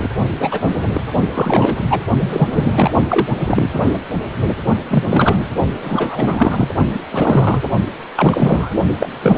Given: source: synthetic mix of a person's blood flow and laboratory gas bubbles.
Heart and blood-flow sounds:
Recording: Doppler ultrasound of blood flow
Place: precordium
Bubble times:
0.00-0.11 s: bubbles
0.40-0.71 s: bubbles
0.94-1.01 s: bubbles
1.35-1.77 s: bubbles
1.90-2.00 s: bubbles
2.19-3.02 s: bubbles
3.09-3.27 s: bubbles
3.39-3.81 s: bubbles
3.86-3.99 s: bubbles
4.89-5.49 s: bubbles
5.82-6.67 s: bubbles
6.91-7.00 s: bubbles
7.11-7.62 s: bubbles
8.15-8.69 s: bubbles
9.00-9.08 s: bubbles
9.22-9.38 s: bubbles
From the record:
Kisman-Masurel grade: 233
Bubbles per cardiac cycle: several, 3 to 8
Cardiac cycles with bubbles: 50 to 99%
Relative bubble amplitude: loud (0.450 to 0.775)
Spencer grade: 3 (all of the cardiac periods contain showers or single bubble signals, but not dominating or overriding the cardiac motion signals)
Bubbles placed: only in the low amplitude regions of the cardiac cycle

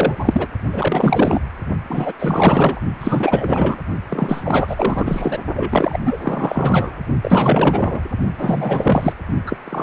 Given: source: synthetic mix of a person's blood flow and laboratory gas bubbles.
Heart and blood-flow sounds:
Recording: Doppler ultrasound of blood flow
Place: precordium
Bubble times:
0.00-0.15 s: bubbles
0.19-0.48 s: bubbles
0.72-1.40 s: bubbles
1.90-2.12 s: bubbles
2.19-2.82 s: bubbles
3.00-3.78 s: bubbles
4.09-5.38 s: bubbles
5.56-5.98 s: bubbles
6.05-6.18 s: bubbles
6.21-6.99 s: bubbles
7.22-8.00 s: bubbles
8.32-9.13 s: bubbles
9.46-9.57 s: bubbles
9.65-9.83 s: bubbles
From the record:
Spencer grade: 4 (maximum detectable bubble signal sounding continuously throughout systole and diastole of every cardiac period, and overriding the amplitude of the normal cardiac signals)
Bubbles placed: only in the low amplitude regions of the cardiac cycle

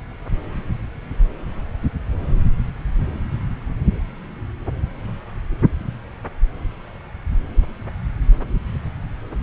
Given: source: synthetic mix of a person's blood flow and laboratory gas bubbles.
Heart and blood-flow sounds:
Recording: Doppler ultrasound of blood flow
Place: subclavian vein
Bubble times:
9.40-9.43 s: bubbles
From the record:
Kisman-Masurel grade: 112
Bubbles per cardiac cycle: 1 to 2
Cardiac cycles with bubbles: 1 to 10%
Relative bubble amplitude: moderate (0.250 to 0.450)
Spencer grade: 1 (occasional bubble signal discernible with the cardiac motion signal, with majority of cardiac periods free of bubbles)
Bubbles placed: anywhere in the cardiac cycle

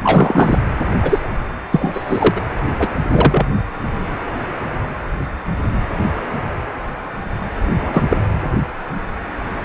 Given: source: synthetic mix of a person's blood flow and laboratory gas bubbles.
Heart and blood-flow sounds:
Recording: Doppler ultrasound of blood flow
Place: precordium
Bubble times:
0.03-0.59 s: bubbles
1.02-1.19 s: bubbles
1.72-2.31 s: bubbles
2.35-2.40 s: bubbles
2.79-2.88 s: bubbles
3.09-3.46 s: bubbles
7.80-8.03 s: bubbles
8.09-8.17 s: bubbles
From the record:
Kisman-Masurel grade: 223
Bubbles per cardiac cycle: several, 3 to 8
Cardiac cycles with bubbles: 10 to 50%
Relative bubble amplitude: loud (0.450 to 0.775)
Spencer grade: 2 (many but less than half of the cardiac periods contain bubble signals, singularly or in groups)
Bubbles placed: anywhere in the cardiac cycle

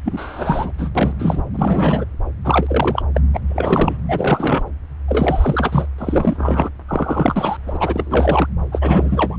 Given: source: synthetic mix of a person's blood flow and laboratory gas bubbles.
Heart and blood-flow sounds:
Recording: Doppler ultrasound of blood flow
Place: subclavian vein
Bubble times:
0.04-0.72 s: bubbles
0.78-0.90 s: bubbles
0.95-1.13 s: bubbles
1.19-1.42 s: bubbles
1.53-2.04 s: bubbles
2.44-3.03 s: bubbles
3.15-3.21 s: bubbles
3.33-3.40 s: bubbles
3.49-3.98 s: bubbles
4.08-4.64 s: bubbles
5.08-5.86 s: bubbles
5.98-6.69 s: bubbles
6.88-7.57 s: bubbles
7.67-7.77 s: bubbles
7.80-8.47 s: bubbles
8.71-9.38 s: bubbles
From the record:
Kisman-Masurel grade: 343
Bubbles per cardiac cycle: rolling drumbeat, 9 or more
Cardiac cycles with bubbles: 100%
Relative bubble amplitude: loud (0.450 to 0.775)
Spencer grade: 3 (all of the cardiac periods contain showers or single bubble signals, but not dominating or overriding the cardiac motion signals)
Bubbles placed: anywhere in the cardiac cycle

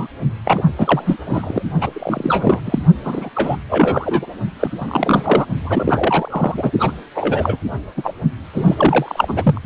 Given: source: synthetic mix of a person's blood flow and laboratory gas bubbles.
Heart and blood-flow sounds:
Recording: Doppler ultrasound of blood flow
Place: precordium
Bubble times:
0.00-0.07 s: bubbles
0.45-0.62 s: bubbles
0.78-1.17 s: bubbles
1.26-1.62 s: bubbles
1.80-1.91 s: bubbles
1.93-2.61 s: bubbles
2.65-2.79 s: bubbles
3.04-3.29 s: bubbles
3.34-3.56 s: bubbles
3.69-4.26 s: bubbles
4.59-4.71 s: bubbles
4.80-5.46 s: bubbles
5.63-6.71 s: bubbles
6.79-6.92 s: bubbles
7.14-7.58 s: bubbles
7.97-8.14 s: bubbles
8.53-9.59 s: bubbles
From the record:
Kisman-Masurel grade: 343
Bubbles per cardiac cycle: rolling drumbeat, 9 or more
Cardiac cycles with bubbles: 100%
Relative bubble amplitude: loud (0.450 to 0.775)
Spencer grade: 3 (all of the cardiac periods contain showers or single bubble signals, but not dominating or overriding the cardiac motion signals)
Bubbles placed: only in the low amplitude regions of the cardiac cycle

